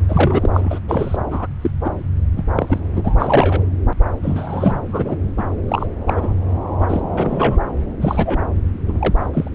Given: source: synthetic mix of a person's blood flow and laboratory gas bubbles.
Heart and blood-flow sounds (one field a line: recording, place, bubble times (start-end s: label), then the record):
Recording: Doppler ultrasound of blood flow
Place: subclavian vein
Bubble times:
0.08-0.50 s: bubbles
0.54-0.79 s: bubbles
0.88-1.17 s: bubbles
1.30-1.46 s: bubbles
1.62-1.71 s: bubbles
1.84-1.89 s: bubbles
2.36-2.44 s: bubbles
2.55-2.80 s: bubbles
2.94-3.17 s: bubbles
3.19-3.62 s: bubbles
4.23-4.79 s: bubbles
4.86-5.17 s: bubbles
5.38-5.44 s: bubbles
5.68-5.87 s: bubbles
6.07-6.34 s: bubbles
6.81-6.86 s: bubbles
6.89-7.01 s: bubbles
7.11-7.57 s: bubbles
8.01-8.46 s: bubbles
8.88-9.27 s: bubbles
9.33-9.50 s: bubbles
From the record:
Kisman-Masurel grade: 242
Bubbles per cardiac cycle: several, 3 to 8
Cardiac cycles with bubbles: 100%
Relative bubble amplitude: moderate (0.250 to 0.450)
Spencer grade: 3 (all of the cardiac periods contain showers or single bubble signals, but not dominating or overriding the cardiac motion signals)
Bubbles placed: anywhere in the cardiac cycle